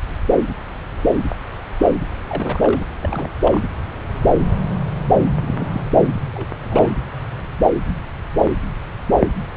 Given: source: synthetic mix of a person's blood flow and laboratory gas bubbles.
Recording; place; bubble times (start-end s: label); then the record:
Doppler ultrasound of blood flow; subclavian vein
2.29-2.84 s: bubbles
3.01-3.29 s: bubbles
3.45-3.63 s: bubbles
5.42-5.83 s: bubbles
5.96-6.08 s: bubbles
6.34-6.49 s: bubbles
6.63-6.92 s: bubbles
From the record:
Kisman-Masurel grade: 221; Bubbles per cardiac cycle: several, 3 to 8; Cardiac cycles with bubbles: 10 to 50%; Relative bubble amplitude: barely perceptible (0.100 to 0.250); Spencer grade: 2 (many but less than half of the cardiac periods contain bubble signals, singularly or in groups); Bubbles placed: anywhere in the cardiac cycle